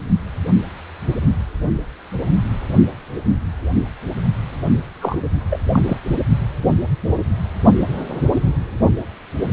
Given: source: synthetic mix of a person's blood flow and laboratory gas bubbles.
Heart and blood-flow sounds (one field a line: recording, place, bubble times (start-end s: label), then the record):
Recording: Doppler ultrasound of blood flow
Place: precordium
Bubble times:
5.01-5.18 s: bubbles
5.50-5.59 s: bubbles
5.72-5.98 s: bubbles
From the record:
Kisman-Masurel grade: 212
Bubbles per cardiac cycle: several, 3 to 8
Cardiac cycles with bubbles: 1 to 10%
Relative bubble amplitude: moderate (0.250 to 0.450)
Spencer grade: 1 (occasional bubble signal discernible with the cardiac motion signal, with majority of cardiac periods free of bubbles)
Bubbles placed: only in the low amplitude regions of the cardiac cycle